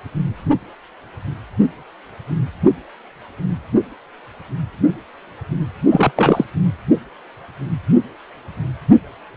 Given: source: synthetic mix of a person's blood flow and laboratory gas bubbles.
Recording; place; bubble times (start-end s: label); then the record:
Doppler ultrasound of blood flow; precordium
5.90-6.12 s: bubbles
6.16-6.44 s: bubbles
From the record:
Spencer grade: 1 (occasional bubble signal discernible with the cardiac motion signal, with majority of cardiac periods free of bubbles); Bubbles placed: anywhere in the cardiac cycle